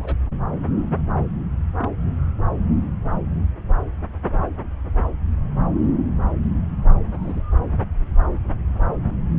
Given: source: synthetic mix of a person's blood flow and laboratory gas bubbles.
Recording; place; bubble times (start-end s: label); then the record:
Doppler ultrasound of blood flow; subclavian vein
0.00-0.17 s: bubbles
1.78-1.90 s: bubbles
4.36-4.48 s: bubbles
7.12-7.43 s: bubbles
From the record:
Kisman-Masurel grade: 121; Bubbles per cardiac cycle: 1 to 2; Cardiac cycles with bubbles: 10 to 50%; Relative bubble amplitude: barely perceptible (0.100 to 0.250); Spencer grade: 2 (many but less than half of the cardiac periods contain bubble signals, singularly or in groups); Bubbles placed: anywhere in the cardiac cycle